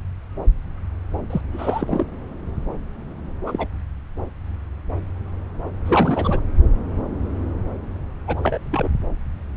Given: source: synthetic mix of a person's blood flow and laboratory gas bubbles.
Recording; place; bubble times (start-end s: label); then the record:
Doppler ultrasound of blood flow; subclavian vein
1.30-1.41 s: bubbles
1.52-2.05 s: bubbles
3.46-3.67 s: bubbles
5.85-6.40 s: bubbles
8.28-8.59 s: bubbles
8.70-8.90 s: bubbles
From the record:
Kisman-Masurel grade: 222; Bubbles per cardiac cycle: several, 3 to 8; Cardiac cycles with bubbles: 10 to 50%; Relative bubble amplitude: moderate (0.250 to 0.450); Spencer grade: 2 (many but less than half of the cardiac periods contain bubble signals, singularly or in groups); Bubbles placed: anywhere in the cardiac cycle